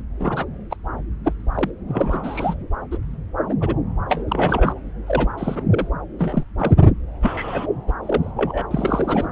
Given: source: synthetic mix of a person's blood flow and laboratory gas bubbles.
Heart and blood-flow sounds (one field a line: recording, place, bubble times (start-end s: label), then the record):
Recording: Doppler ultrasound of blood flow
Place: subclavian vein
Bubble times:
0.20-0.45 s: bubbles
0.71-0.76 s: bubbles
1.24-1.33 s: bubbles
1.54-1.71 s: bubbles
1.89-2.54 s: bubbles
2.92-2.97 s: bubbles
3.49-3.55 s: bubbles
3.60-3.74 s: bubbles
4.09-4.79 s: bubbles
5.06-5.28 s: bubbles
5.38-5.64 s: bubbles
5.70-5.88 s: bubbles
6.19-6.44 s: bubbles
6.58-6.76 s: bubbles
7.21-7.66 s: bubbles
7.87-7.92 s: bubbles
8.03-8.31 s: bubbles
8.37-8.66 s: bubbles
8.71-9.27 s: bubbles
From the record:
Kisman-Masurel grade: 232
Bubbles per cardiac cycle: several, 3 to 8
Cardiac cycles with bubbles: 50 to 99%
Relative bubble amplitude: moderate (0.250 to 0.450)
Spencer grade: 3 (all of the cardiac periods contain showers or single bubble signals, but not dominating or overriding the cardiac motion signals)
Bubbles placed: anywhere in the cardiac cycle